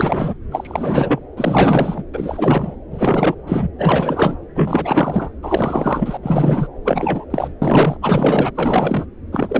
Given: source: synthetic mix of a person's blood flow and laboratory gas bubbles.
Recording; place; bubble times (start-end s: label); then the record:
Doppler ultrasound of blood flow; subclavian vein
0.00-0.34 s: bubbles
0.51-1.20 s: bubbles
1.37-2.04 s: bubbles
2.13-2.76 s: bubbles
2.90-3.35 s: bubbles
3.46-3.68 s: bubbles
3.78-4.36 s: bubbles
4.54-5.30 s: bubbles
5.42-6.17 s: bubbles
6.22-6.67 s: bubbles
6.84-7.25 s: bubbles
7.30-7.53 s: bubbles
7.61-7.97 s: bubbles
8.02-8.52 s: bubbles
8.55-9.06 s: bubbles
9.32-9.60 s: bubbles
From the record:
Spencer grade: 4 (maximum detectable bubble signal sounding continuously throughout systole and diastole of every cardiac period, and overriding the amplitude of the normal cardiac signals); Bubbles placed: anywhere in the cardiac cycle